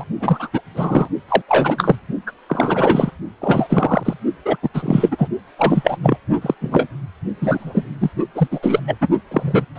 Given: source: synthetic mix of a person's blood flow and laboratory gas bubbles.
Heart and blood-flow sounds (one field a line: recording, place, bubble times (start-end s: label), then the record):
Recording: Doppler ultrasound of blood flow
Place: precordium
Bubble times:
0.00-0.04 s: bubbles
0.20-0.49 s: bubbles
0.53-0.61 s: bubbles
0.74-1.08 s: bubbles
1.28-1.42 s: bubbles
1.48-1.96 s: bubbles
2.27-2.31 s: bubbles
2.48-3.11 s: bubbles
3.41-3.67 s: bubbles
3.69-4.14 s: bubbles
4.45-4.56 s: bubbles
4.62-4.69 s: bubbles
4.74-5.28 s: bubbles
5.58-5.97 s: bubbles
6.03-6.17 s: bubbles
6.41-6.54 s: bubbles
6.60-6.87 s: bubbles
7.41-7.85 s: bubbles
8.01-8.10 s: bubbles
8.35-8.48 s: bubbles
8.51-8.60 s: bubbles
8.62-8.80 s: bubbles
8.87-8.96 s: bubbles
9.01-9.08 s: bubbles
9.31-9.65 s: bubbles
9.75-9.79 s: bubbles
From the record:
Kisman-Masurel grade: 343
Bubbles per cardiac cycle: rolling drumbeat, 9 or more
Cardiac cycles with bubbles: 100%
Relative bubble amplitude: loud (0.450 to 0.775)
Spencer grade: 3 (all of the cardiac periods contain showers or single bubble signals, but not dominating or overriding the cardiac motion signals)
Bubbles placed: only in the low amplitude regions of the cardiac cycle